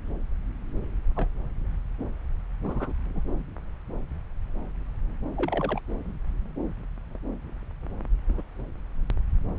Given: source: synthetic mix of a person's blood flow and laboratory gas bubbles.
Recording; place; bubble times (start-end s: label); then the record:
Doppler ultrasound of blood flow; subclavian vein
1.16-1.28 s: bubbles
2.63-2.92 s: bubbles
3.05-3.20 s: bubbles
5.36-5.81 s: bubbles
8.28-8.42 s: bubbles
From the record:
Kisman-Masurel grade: 121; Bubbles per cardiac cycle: 1 to 2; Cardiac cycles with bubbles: 10 to 50%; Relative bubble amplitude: barely perceptible (0.100 to 0.250); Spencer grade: 2 (many but less than half of the cardiac periods contain bubble signals, singularly or in groups); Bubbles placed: anywhere in the cardiac cycle